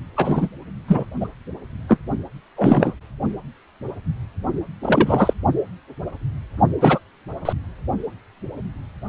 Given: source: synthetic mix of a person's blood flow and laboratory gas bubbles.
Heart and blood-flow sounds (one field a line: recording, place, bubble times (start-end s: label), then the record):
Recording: Doppler ultrasound of blood flow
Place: precordium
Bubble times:
0.16-0.48 s: bubbles
0.88-1.09 s: bubbles
1.20-1.29 s: bubbles
1.88-1.98 s: bubbles
2.56-2.93 s: bubbles
4.83-5.33 s: bubbles
6.81-6.99 s: bubbles
7.45-7.53 s: bubbles
From the record:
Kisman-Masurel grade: 233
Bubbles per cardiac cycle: several, 3 to 8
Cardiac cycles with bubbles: 50 to 99%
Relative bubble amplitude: loud (0.450 to 0.775)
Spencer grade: 3 (all of the cardiac periods contain showers or single bubble signals, but not dominating or overriding the cardiac motion signals)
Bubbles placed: only in the low amplitude regions of the cardiac cycle